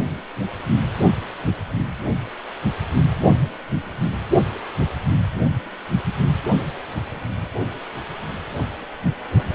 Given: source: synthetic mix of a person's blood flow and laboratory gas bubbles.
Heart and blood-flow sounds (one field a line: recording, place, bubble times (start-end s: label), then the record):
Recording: Doppler ultrasound of blood flow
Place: precordium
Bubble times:
no bubbles
From the record:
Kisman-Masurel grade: 000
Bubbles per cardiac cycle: 0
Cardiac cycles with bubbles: 0%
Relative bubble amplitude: no bubbles discernible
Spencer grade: 0 (complete lack of bubble signals)